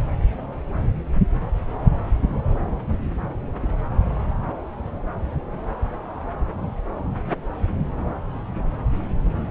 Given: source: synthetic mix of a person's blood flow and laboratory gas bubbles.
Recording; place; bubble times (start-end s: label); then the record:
Doppler ultrasound of blood flow; subclavian vein
no bubbles
From the record:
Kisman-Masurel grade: 000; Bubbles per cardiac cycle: 0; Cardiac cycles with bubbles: 0%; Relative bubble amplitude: no bubbles discernible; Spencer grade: 0 (complete lack of bubble signals)